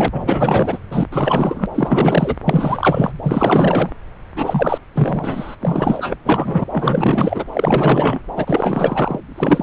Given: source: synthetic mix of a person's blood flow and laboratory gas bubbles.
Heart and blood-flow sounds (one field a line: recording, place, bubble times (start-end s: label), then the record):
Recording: Doppler ultrasound of blood flow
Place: subclavian vein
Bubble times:
0.00-0.08 s: bubbles
0.11-0.78 s: bubbles
0.91-1.07 s: bubbles
1.12-1.66 s: bubbles
1.74-2.36 s: bubbles
2.45-3.12 s: bubbles
3.22-3.90 s: bubbles
4.35-4.78 s: bubbles
4.93-5.55 s: bubbles
5.61-6.17 s: bubbles
6.25-6.64 s: bubbles
6.70-7.44 s: bubbles
7.53-8.20 s: bubbles
8.35-9.20 s: bubbles
9.37-9.63 s: bubbles
From the record:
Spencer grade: 4 (maximum detectable bubble signal sounding continuously throughout systole and diastole of every cardiac period, and overriding the amplitude of the normal cardiac signals)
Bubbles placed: anywhere in the cardiac cycle